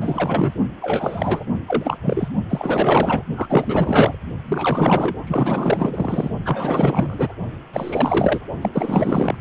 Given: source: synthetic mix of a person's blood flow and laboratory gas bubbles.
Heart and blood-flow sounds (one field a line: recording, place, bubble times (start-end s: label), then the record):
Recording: Doppler ultrasound of blood flow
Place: precordium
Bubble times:
0.00-0.54 s: bubbles
0.81-1.45 s: bubbles
1.68-1.97 s: bubbles
2.02-2.29 s: bubbles
2.49-3.22 s: bubbles
3.36-4.17 s: bubbles
4.45-5.15 s: bubbles
5.27-6.29 s: bubbles
6.44-7.33 s: bubbles
7.73-8.41 s: bubbles
8.61-9.37 s: bubbles
From the record:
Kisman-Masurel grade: 444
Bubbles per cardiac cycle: continuous sound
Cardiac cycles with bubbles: 100%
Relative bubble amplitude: maximal (0.775 to 0.999)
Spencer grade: 4 (maximum detectable bubble signal sounding continuously throughout systole and diastole of every cardiac period, and overriding the amplitude of the normal cardiac signals)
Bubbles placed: only in the low amplitude regions of the cardiac cycle